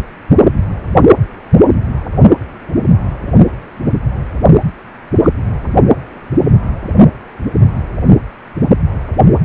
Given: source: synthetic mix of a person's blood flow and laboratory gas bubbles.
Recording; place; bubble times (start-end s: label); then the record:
Doppler ultrasound of blood flow; precordium
5.23-5.30 s: bubbles
From the record:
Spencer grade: 1 (occasional bubble signal discernible with the cardiac motion signal, with majority of cardiac periods free of bubbles); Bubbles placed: only in the low amplitude regions of the cardiac cycle